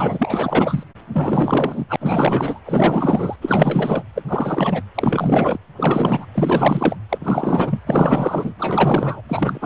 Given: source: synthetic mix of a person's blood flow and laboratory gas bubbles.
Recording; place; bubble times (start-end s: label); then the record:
Doppler ultrasound of blood flow; precordium
0.00-0.83 s: bubbles
1.14-1.85 s: bubbles
1.88-1.96 s: bubbles
2.00-2.60 s: bubbles
2.65-3.36 s: bubbles
3.41-4.03 s: bubbles
4.14-4.22 s: bubbles
4.29-4.82 s: bubbles
4.95-5.59 s: bubbles
5.77-6.26 s: bubbles
6.34-6.96 s: bubbles
7.09-7.81 s: bubbles
7.86-8.54 s: bubbles
8.59-9.22 s: bubbles
9.29-9.66 s: bubbles
From the record:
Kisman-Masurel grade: 444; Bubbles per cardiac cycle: continuous sound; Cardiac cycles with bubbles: 100%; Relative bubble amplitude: maximal (0.775 to 0.999); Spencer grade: 4 (maximum detectable bubble signal sounding continuously throughout systole and diastole of every cardiac period, and overriding the amplitude of the normal cardiac signals); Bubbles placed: anywhere in the cardiac cycle